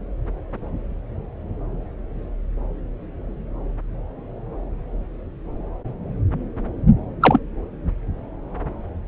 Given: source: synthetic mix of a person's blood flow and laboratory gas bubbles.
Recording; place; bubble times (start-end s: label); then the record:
Doppler ultrasound of blood flow; subclavian vein
7.21-7.39 s: bubbles
From the record:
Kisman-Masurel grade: 113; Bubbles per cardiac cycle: 1 to 2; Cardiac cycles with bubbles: 1 to 10%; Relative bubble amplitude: loud (0.450 to 0.775); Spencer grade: 1 (occasional bubble signal discernible with the cardiac motion signal, with majority of cardiac periods free of bubbles); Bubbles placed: anywhere in the cardiac cycle